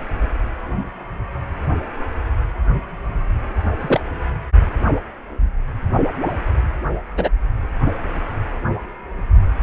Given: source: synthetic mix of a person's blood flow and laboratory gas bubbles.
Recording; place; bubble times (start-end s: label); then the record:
Doppler ultrasound of blood flow; precordium
3.81-4.00 s: bubbles
7.17-7.29 s: bubbles
7.85-7.92 s: bubbles
From the record:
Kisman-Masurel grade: 123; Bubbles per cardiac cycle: 1 to 2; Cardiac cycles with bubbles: 10 to 50%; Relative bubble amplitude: loud (0.450 to 0.775); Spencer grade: 2 (many but less than half of the cardiac periods contain bubble signals, singularly or in groups); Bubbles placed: anywhere in the cardiac cycle